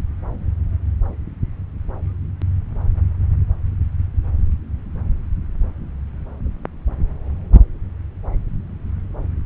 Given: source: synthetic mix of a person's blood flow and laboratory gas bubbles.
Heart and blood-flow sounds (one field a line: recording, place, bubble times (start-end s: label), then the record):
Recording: Doppler ultrasound of blood flow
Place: subclavian vein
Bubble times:
no bubbles
From the record:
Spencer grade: 0 (complete lack of bubble signals)